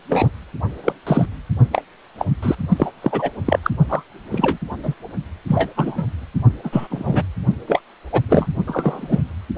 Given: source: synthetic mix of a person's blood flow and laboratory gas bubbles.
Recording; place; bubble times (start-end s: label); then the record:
Doppler ultrasound of blood flow; precordium
0.09-0.30 s: bubbles
0.83-0.92 s: bubbles
1.06-1.27 s: bubbles
1.72-1.82 s: bubbles
2.19-2.25 s: bubbles
2.42-2.55 s: bubbles
2.69-2.92 s: bubbles
3.01-3.29 s: bubbles
3.46-3.59 s: bubbles
3.62-3.71 s: bubbles
3.89-4.03 s: bubbles
4.32-4.58 s: bubbles
4.83-4.95 s: bubbles
5.48-5.70 s: bubbles
5.76-6.06 s: bubbles
6.64-6.88 s: bubbles
6.90-7.24 s: bubbles
7.67-7.81 s: bubbles
8.12-8.21 s: bubbles
8.29-8.47 s: bubbles
8.67-9.21 s: bubbles
From the record:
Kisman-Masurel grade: 243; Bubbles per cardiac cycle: several, 3 to 8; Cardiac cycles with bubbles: 100%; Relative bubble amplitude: loud (0.450 to 0.775); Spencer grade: 3 (all of the cardiac periods contain showers or single bubble signals, but not dominating or overriding the cardiac motion signals); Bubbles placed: only in the low amplitude regions of the cardiac cycle